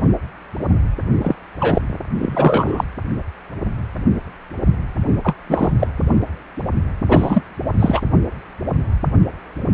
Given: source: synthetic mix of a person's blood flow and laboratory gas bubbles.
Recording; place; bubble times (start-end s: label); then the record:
Doppler ultrasound of blood flow; precordium
1.21-1.35 s: bubbles
1.59-1.81 s: bubbles
2.19-2.84 s: bubbles
5.23-5.34 s: bubbles
5.49-5.71 s: bubbles
5.79-5.87 s: bubbles
7.08-7.42 s: bubbles
7.79-8.02 s: bubbles
From the record:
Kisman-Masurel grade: 223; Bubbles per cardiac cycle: several, 3 to 8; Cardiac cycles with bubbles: 10 to 50%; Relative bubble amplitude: loud (0.450 to 0.775); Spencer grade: 2 (many but less than half of the cardiac periods contain bubble signals, singularly or in groups); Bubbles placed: anywhere in the cardiac cycle